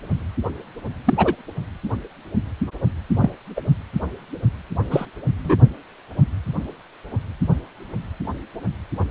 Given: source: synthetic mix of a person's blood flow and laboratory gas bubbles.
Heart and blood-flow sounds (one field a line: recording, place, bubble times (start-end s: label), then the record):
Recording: Doppler ultrasound of blood flow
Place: precordium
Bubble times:
1.06-1.15 s: bubbles
1.17-1.33 s: bubbles
3.19-3.31 s: bubbles
3.56-3.61 s: bubbles
4.90-5.05 s: bubbles
5.44-5.56 s: bubbles
From the record:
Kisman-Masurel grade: 123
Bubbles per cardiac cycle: 1 to 2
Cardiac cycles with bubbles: 10 to 50%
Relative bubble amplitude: loud (0.450 to 0.775)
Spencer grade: 2 (many but less than half of the cardiac periods contain bubble signals, singularly or in groups)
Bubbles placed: only in the low amplitude regions of the cardiac cycle